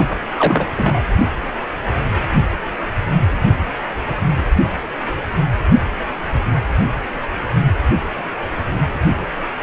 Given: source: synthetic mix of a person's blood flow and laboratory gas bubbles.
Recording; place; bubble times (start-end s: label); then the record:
Doppler ultrasound of blood flow; precordium
0.00-0.21 s: bubbles
0.36-0.71 s: bubbles
0.76-1.03 s: bubbles
From the record:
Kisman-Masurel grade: 212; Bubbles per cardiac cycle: several, 3 to 8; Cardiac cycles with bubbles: 1 to 10%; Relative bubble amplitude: moderate (0.250 to 0.450); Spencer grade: 1 (occasional bubble signal discernible with the cardiac motion signal, with majority of cardiac periods free of bubbles); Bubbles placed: anywhere in the cardiac cycle